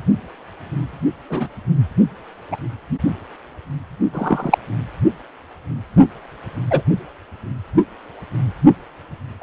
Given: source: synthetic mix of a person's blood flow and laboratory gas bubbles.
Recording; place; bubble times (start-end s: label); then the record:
Doppler ultrasound of blood flow; precordium
1.29-1.48 s: bubbles
2.52-2.56 s: bubbles
4.13-4.58 s: bubbles
6.70-6.81 s: bubbles
9.41-9.43 s: bubbles
From the record:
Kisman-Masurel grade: 123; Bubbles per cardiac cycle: 1 to 2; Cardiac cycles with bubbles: 10 to 50%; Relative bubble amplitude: loud (0.450 to 0.775); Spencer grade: 2 (many but less than half of the cardiac periods contain bubble signals, singularly or in groups); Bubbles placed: only in the low amplitude regions of the cardiac cycle